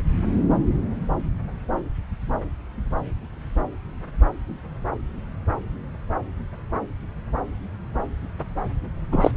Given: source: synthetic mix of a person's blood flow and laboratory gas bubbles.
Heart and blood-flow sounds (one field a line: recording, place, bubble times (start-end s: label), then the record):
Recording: Doppler ultrasound of blood flow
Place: subclavian vein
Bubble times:
9.12-9.31 s: bubbles
From the record:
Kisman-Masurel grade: 113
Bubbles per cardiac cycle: 1 to 2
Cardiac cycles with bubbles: 1 to 10%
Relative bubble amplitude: loud (0.450 to 0.775)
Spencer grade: 1 (occasional bubble signal discernible with the cardiac motion signal, with majority of cardiac periods free of bubbles)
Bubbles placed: anywhere in the cardiac cycle